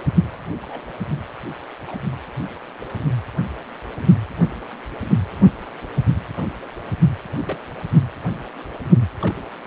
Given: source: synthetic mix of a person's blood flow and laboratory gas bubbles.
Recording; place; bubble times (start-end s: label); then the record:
Doppler ultrasound of blood flow; precordium
0.57-0.60 s: bubbles
0.63-0.81 s: bubbles
1.87-1.96 s: bubbles
7.46-7.58 s: bubbles
9.21-9.41 s: bubbles
From the record:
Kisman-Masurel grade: 121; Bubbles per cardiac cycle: 1 to 2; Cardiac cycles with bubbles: 10 to 50%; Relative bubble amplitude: barely perceptible (0.100 to 0.250); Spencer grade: 2 (many but less than half of the cardiac periods contain bubble signals, singularly or in groups); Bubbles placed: anywhere in the cardiac cycle